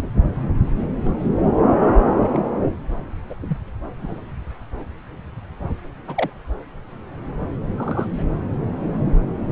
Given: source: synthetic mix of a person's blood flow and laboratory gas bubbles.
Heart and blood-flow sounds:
Doppler ultrasound of blood flow; subclavian vein
0.00-0.10 s: bubbles
1.04-1.13 s: bubbles
1.17-1.29 s: bubbles
2.18-2.38 s: bubbles
3.29-3.35 s: bubbles
3.40-3.58 s: bubbles
4.02-4.21 s: bubbles
6.08-6.30 s: bubbles
7.76-8.08 s: bubbles
8.17-8.35 s: bubbles
From the record:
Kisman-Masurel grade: 121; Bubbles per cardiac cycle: 1 to 2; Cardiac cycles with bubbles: 10 to 50%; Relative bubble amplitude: barely perceptible (0.100 to 0.250); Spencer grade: 2 (many but less than half of the cardiac periods contain bubble signals, singularly or in groups); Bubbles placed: anywhere in the cardiac cycle

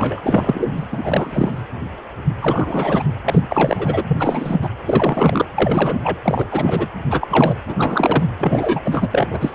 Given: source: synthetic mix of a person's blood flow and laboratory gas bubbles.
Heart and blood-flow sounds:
Doppler ultrasound of blood flow; precordium
0.00-0.71 s: bubbles
0.77-0.85 s: bubbles
0.91-1.62 s: bubbles
2.41-3.04 s: bubbles
3.24-4.03 s: bubbles
4.07-4.58 s: bubbles
4.62-4.69 s: bubbles
4.86-5.45 s: bubbles
5.57-6.18 s: bubbles
6.22-6.47 s: bubbles
6.51-6.87 s: bubbles
7.10-7.54 s: bubbles
7.66-8.23 s: bubbles
8.38-8.81 s: bubbles
8.84-9.08 s: bubbles
9.11-9.28 s: bubbles
9.30-9.55 s: bubbles
From the record:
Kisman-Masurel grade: 333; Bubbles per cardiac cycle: rolling drumbeat, 9 or more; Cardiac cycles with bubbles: 50 to 99%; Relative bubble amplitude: loud (0.450 to 0.775); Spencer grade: 3 (all of the cardiac periods contain showers or single bubble signals, but not dominating or overriding the cardiac motion signals); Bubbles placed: anywhere in the cardiac cycle

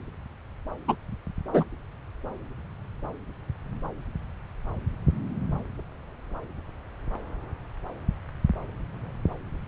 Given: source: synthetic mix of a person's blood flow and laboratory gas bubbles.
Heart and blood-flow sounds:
Doppler ultrasound of blood flow; subclavian vein
0.88-0.95 s: bubbles
1.53-1.65 s: bubbles
From the record:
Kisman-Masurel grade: 113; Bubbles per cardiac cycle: 1 to 2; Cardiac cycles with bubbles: 1 to 10%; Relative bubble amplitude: loud (0.450 to 0.775); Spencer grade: 1 (occasional bubble signal discernible with the cardiac motion signal, with majority of cardiac periods free of bubbles); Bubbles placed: anywhere in the cardiac cycle

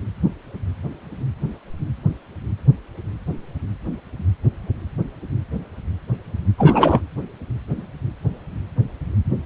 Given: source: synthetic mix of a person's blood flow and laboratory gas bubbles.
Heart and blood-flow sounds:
Doppler ultrasound of blood flow; precordium
6.58-7.01 s: bubbles
From the record:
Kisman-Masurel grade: 223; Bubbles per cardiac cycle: several, 3 to 8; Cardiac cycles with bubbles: 10 to 50%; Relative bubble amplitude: loud (0.450 to 0.775); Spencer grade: 2 (many but less than half of the cardiac periods contain bubble signals, singularly or in groups); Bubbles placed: anywhere in the cardiac cycle

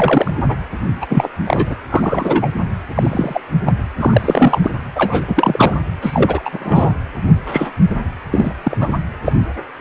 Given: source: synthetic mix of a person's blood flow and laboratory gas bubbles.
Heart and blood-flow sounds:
Doppler ultrasound of blood flow; precordium
0.00-0.32 s: bubbles
0.48-0.57 s: bubbles
1.01-1.06 s: bubbles
1.09-1.28 s: bubbles
1.46-1.76 s: bubbles
1.89-2.49 s: bubbles
2.94-3.41 s: bubbles
3.65-3.73 s: bubbles
3.99-4.59 s: bubbles
4.63-4.78 s: bubbles
4.96-5.79 s: bubbles
6.01-6.92 s: bubbles
7.46-7.70 s: bubbles
8.32-8.53 s: bubbles
8.63-8.77 s: bubbles
8.80-8.93 s: bubbles
9.26-9.33 s: bubbles
From the record:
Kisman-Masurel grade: 243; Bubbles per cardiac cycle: several, 3 to 8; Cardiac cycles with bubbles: 100%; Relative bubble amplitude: loud (0.450 to 0.775); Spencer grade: 3 (all of the cardiac periods contain showers or single bubble signals, but not dominating or overriding the cardiac motion signals); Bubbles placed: anywhere in the cardiac cycle

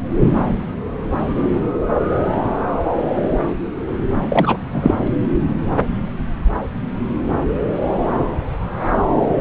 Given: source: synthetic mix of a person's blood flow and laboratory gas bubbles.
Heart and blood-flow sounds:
Doppler ultrasound of blood flow; subclavian vein
4.21-4.57 s: bubbles
4.72-4.92 s: bubbles
From the record:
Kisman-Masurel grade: 213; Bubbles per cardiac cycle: several, 3 to 8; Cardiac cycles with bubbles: 1 to 10%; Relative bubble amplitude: loud (0.450 to 0.775); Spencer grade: 1 (occasional bubble signal discernible with the cardiac motion signal, with majority of cardiac periods free of bubbles); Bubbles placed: anywhere in the cardiac cycle

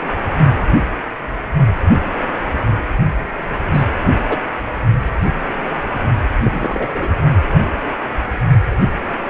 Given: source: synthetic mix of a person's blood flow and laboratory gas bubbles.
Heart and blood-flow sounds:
Doppler ultrasound of blood flow; precordium
3.73-3.85 s: bubbles
4.28-4.39 s: bubbles
6.43-7.08 s: bubbles
From the record:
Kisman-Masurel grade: 123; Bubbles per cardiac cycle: 1 to 2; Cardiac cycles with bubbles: 10 to 50%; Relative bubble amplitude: loud (0.450 to 0.775); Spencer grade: 2 (many but less than half of the cardiac periods contain bubble signals, singularly or in groups); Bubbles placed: only in the low amplitude regions of the cardiac cycle

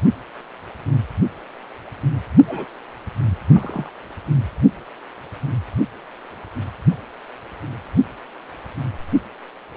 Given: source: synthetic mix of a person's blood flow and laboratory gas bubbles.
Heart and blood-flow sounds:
Doppler ultrasound of blood flow; precordium
2.48-2.65 s: bubbles
3.54-3.92 s: bubbles
From the record:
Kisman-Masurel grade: 112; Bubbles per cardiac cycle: 1 to 2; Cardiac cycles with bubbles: 1 to 10%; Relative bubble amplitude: moderate (0.250 to 0.450); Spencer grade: 1 (occasional bubble signal discernible with the cardiac motion signal, with majority of cardiac periods free of bubbles); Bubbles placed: only in the low amplitude regions of the cardiac cycle

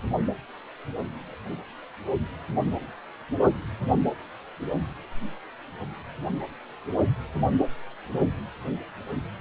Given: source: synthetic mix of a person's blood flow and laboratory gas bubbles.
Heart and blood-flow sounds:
Doppler ultrasound of blood flow; precordium
no bubbles
From the record:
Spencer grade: 0 (complete lack of bubble signals)

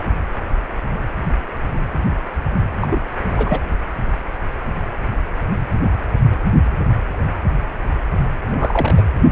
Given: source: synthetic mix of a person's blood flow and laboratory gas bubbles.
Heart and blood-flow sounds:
Doppler ultrasound of blood flow; precordium
2.76-3.01 s: bubbles
3.37-3.60 s: bubbles
8.48-9.03 s: bubbles
From the record:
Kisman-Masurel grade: 222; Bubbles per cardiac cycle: several, 3 to 8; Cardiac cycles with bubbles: 10 to 50%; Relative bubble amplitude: moderate (0.250 to 0.450); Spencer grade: 2 (many but less than half of the cardiac periods contain bubble signals, singularly or in groups); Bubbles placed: only in the low amplitude regions of the cardiac cycle

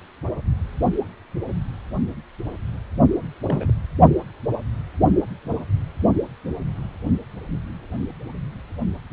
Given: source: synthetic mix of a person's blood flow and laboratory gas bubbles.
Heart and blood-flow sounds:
Doppler ultrasound of blood flow; precordium
3.46-3.73 s: bubbles
From the record:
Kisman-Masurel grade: 111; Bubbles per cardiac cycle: 1 to 2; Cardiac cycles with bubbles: 1 to 10%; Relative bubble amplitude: barely perceptible (0.100 to 0.250); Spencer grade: 1 (occasional bubble signal discernible with the cardiac motion signal, with majority of cardiac periods free of bubbles); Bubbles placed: only in the low amplitude regions of the cardiac cycle

